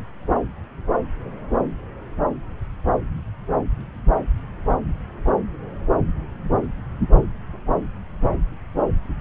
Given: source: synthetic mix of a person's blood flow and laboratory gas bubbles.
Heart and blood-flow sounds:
Doppler ultrasound of blood flow; subclavian vein
no bubbles
From the record:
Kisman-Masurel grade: 000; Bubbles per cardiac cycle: 0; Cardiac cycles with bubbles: 0%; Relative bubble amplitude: no bubbles discernible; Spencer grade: 0 (complete lack of bubble signals)

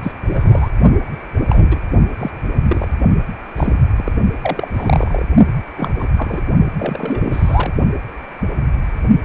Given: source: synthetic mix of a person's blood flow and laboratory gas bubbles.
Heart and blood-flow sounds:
Doppler ultrasound of blood flow; precordium
0.03-0.12 s: bubbles
0.32-0.70 s: bubbles
1.50-1.79 s: bubbles
2.18-2.30 s: bubbles
2.68-2.93 s: bubbles
3.56-3.79 s: bubbles
3.96-4.12 s: bubbles
4.42-4.68 s: bubbles
4.72-5.25 s: bubbles
5.77-5.92 s: bubbles
5.98-6.06 s: bubbles
6.17-6.41 s: bubbles
6.79-7.72 s: bubbles
From the record:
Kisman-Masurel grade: 232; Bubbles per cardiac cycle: several, 3 to 8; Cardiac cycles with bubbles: 50 to 99%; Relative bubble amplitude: moderate (0.250 to 0.450); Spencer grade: 3 (all of the cardiac periods contain showers or single bubble signals, but not dominating or overriding the cardiac motion signals); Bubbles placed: only in the low amplitude regions of the cardiac cycle

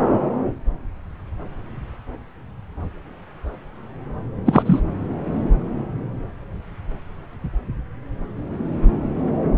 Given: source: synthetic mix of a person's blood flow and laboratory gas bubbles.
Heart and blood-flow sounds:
Doppler ultrasound of blood flow; subclavian vein
4.46-4.63 s: bubbles
4.65-4.79 s: bubbles
From the record:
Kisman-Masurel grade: 213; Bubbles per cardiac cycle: several, 3 to 8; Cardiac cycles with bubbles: 1 to 10%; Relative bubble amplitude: loud (0.450 to 0.775); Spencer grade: 1 (occasional bubble signal discernible with the cardiac motion signal, with majority of cardiac periods free of bubbles); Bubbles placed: anywhere in the cardiac cycle

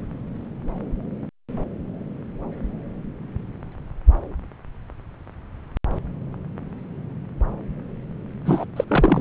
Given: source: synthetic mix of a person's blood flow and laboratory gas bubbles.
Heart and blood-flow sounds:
Doppler ultrasound of blood flow; subclavian vein
8.46-8.65 s: bubbles
8.76-8.85 s: bubbles
8.88-9.21 s: bubbles
From the record:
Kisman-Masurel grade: 212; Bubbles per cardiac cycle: several, 3 to 8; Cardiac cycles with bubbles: 1 to 10%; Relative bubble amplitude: moderate (0.250 to 0.450); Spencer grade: 1 (occasional bubble signal discernible with the cardiac motion signal, with majority of cardiac periods free of bubbles); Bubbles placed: anywhere in the cardiac cycle

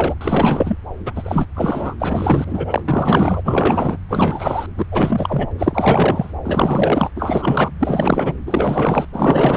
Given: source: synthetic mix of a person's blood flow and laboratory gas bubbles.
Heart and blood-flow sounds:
Doppler ultrasound of blood flow; subclavian vein
0.00-0.14 s: bubbles
0.20-0.78 s: bubbles
1.05-1.47 s: bubbles
1.55-1.95 s: bubbles
2.00-2.81 s: bubbles
2.88-3.41 s: bubbles
3.44-3.98 s: bubbles
4.08-4.67 s: bubbles
4.77-4.85 s: bubbles
4.91-5.48 s: bubbles
5.58-6.33 s: bubbles
6.44-7.11 s: bubbles
7.16-7.71 s: bubbles
7.79-8.34 s: bubbles
8.46-9.05 s: bubbles
9.12-9.57 s: bubbles
From the record:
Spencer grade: 4 (maximum detectable bubble signal sounding continuously throughout systole and diastole of every cardiac period, and overriding the amplitude of the normal cardiac signals); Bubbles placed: anywhere in the cardiac cycle

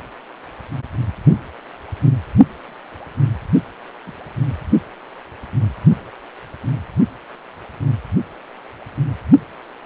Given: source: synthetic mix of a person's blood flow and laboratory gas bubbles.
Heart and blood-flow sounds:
Doppler ultrasound of blood flow; precordium
4.06-4.12 s: bubbles
From the record:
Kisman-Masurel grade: 111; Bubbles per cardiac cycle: 1 to 2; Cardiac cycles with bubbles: 1 to 10%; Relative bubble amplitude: barely perceptible (0.100 to 0.250); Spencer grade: 1 (occasional bubble signal discernible with the cardiac motion signal, with majority of cardiac periods free of bubbles); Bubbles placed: only in the low amplitude regions of the cardiac cycle

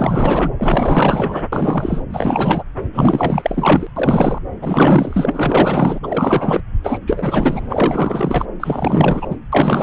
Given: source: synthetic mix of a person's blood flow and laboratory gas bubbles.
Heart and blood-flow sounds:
Doppler ultrasound of blood flow; subclavian vein
0.00-0.52 s: bubbles
0.58-1.44 s: bubbles
1.52-2.02 s: bubbles
2.09-2.63 s: bubbles
2.93-3.87 s: bubbles
3.96-4.39 s: bubbles
4.62-6.00 s: bubbles
6.03-6.61 s: bubbles
6.83-6.98 s: bubbles
7.06-7.68 s: bubbles
7.70-8.46 s: bubbles
8.60-9.37 s: bubbles
9.52-9.83 s: bubbles
From the record:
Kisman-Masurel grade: 444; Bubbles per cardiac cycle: continuous sound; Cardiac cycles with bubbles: 100%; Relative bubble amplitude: maximal (0.775 to 0.999); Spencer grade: 4 (maximum detectable bubble signal sounding continuously throughout systole and diastole of every cardiac period, and overriding the amplitude of the normal cardiac signals); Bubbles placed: anywhere in the cardiac cycle

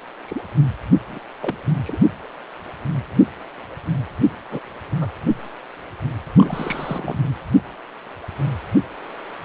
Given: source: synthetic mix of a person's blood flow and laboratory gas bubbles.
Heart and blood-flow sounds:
Doppler ultrasound of blood flow; precordium
0.25-0.42 s: bubbles
1.06-1.20 s: bubbles
1.41-1.56 s: bubbles
1.84-1.98 s: bubbles
4.51-4.60 s: bubbles
5.00-5.09 s: bubbles
5.24-5.33 s: bubbles
6.33-7.19 s: bubbles
From the record:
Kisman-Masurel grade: 221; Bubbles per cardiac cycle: several, 3 to 8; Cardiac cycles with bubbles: 10 to 50%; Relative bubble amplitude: barely perceptible (0.100 to 0.250); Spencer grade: 2 (many but less than half of the cardiac periods contain bubble signals, singularly or in groups); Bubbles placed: anywhere in the cardiac cycle

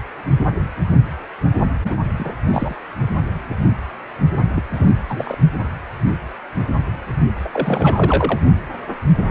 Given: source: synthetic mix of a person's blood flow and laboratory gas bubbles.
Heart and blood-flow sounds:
Doppler ultrasound of blood flow; precordium
1.84-1.94 s: bubbles
2.19-2.35 s: bubbles
2.47-2.75 s: bubbles
4.54-4.62 s: bubbles
4.74-4.92 s: bubbles
5.08-5.38 s: bubbles
7.40-7.48 s: bubbles
7.52-8.39 s: bubbles
From the record:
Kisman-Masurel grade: 222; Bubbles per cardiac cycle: several, 3 to 8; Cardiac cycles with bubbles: 10 to 50%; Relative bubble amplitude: moderate (0.250 to 0.450); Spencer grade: 2 (many but less than half of the cardiac periods contain bubble signals, singularly or in groups); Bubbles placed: only in the low amplitude regions of the cardiac cycle

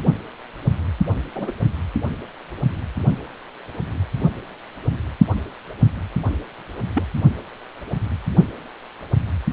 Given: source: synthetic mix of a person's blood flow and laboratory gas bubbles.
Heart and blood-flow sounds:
Doppler ultrasound of blood flow; precordium
1.35-1.51 s: bubbles
6.95-7.03 s: bubbles
From the record:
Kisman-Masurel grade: 122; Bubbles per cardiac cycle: 1 to 2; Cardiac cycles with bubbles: 10 to 50%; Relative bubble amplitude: moderate (0.250 to 0.450); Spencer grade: 2 (many but less than half of the cardiac periods contain bubble signals, singularly or in groups); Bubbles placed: only in the low amplitude regions of the cardiac cycle

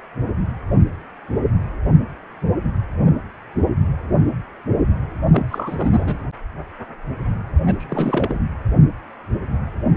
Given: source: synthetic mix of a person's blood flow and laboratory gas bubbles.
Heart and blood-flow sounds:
Doppler ultrasound of blood flow; precordium
5.32-6.18 s: bubbles
7.66-7.76 s: bubbles
7.79-8.40 s: bubbles
From the record:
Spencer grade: 2 (many but less than half of the cardiac periods contain bubble signals, singularly or in groups); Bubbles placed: anywhere in the cardiac cycle

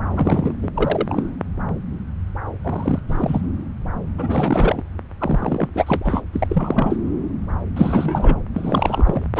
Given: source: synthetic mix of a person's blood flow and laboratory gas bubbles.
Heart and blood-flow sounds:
Doppler ultrasound of blood flow; subclavian vein
0.12-0.55 s: bubbles
0.62-0.70 s: bubbles
0.74-1.23 s: bubbles
2.64-3.00 s: bubbles
3.08-3.41 s: bubbles
4.18-4.83 s: bubbles
5.19-5.69 s: bubbles
5.74-6.23 s: bubbles
6.33-6.97 s: bubbles
7.76-8.42 s: bubbles
8.54-9.27 s: bubbles
9.36-9.40 s: bubbles
From the record:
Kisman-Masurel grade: 332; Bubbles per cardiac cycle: rolling drumbeat, 9 or more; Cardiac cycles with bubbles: 50 to 99%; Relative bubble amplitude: moderate (0.250 to 0.450); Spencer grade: 3 (all of the cardiac periods contain showers or single bubble signals, but not dominating or overriding the cardiac motion signals); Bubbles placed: anywhere in the cardiac cycle

